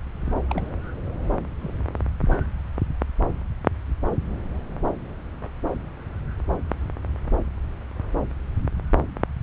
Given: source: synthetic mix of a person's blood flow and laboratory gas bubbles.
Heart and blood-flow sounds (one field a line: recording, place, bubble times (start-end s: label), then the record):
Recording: Doppler ultrasound of blood flow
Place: subclavian vein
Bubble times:
0.49-0.69 s: bubbles
1.60-1.74 s: bubbles
From the record:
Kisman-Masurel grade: 111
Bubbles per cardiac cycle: 1 to 2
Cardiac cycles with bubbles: 1 to 10%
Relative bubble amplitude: barely perceptible (0.100 to 0.250)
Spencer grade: 1 (occasional bubble signal discernible with the cardiac motion signal, with majority of cardiac periods free of bubbles)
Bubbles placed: anywhere in the cardiac cycle